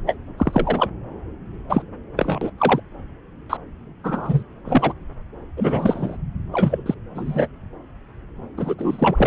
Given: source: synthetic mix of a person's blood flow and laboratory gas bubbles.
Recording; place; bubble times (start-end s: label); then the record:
Doppler ultrasound of blood flow; subclavian vein
0.06-0.16 s: bubbles
0.38-0.89 s: bubbles
1.69-1.82 s: bubbles
2.17-2.50 s: bubbles
2.58-2.80 s: bubbles
3.50-3.57 s: bubbles
4.04-4.43 s: bubbles
4.64-4.93 s: bubbles
5.56-6.17 s: bubbles
6.52-6.94 s: bubbles
7.14-7.47 s: bubbles
8.56-8.75 s: bubbles
8.78-9.27 s: bubbles
From the record:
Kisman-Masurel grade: 233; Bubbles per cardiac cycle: several, 3 to 8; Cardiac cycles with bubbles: 50 to 99%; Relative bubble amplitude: loud (0.450 to 0.775); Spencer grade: 3 (all of the cardiac periods contain showers or single bubble signals, but not dominating or overriding the cardiac motion signals); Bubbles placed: anywhere in the cardiac cycle